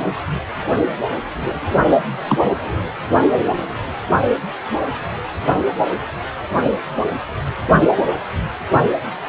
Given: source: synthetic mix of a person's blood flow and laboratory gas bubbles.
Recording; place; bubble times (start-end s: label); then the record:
Doppler ultrasound of blood flow; precordium
2.27-2.51 s: bubbles
From the record:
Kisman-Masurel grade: 113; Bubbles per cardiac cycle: 1 to 2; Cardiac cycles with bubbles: 1 to 10%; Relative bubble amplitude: loud (0.450 to 0.775); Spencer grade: 1 (occasional bubble signal discernible with the cardiac motion signal, with majority of cardiac periods free of bubbles); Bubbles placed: only in the low amplitude regions of the cardiac cycle